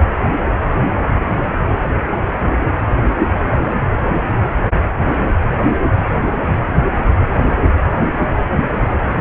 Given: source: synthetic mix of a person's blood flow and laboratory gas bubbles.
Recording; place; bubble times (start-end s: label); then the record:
Doppler ultrasound of blood flow; precordium
8.62-8.90 s: bubbles
From the record:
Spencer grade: 1 (occasional bubble signal discernible with the cardiac motion signal, with majority of cardiac periods free of bubbles); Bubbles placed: anywhere in the cardiac cycle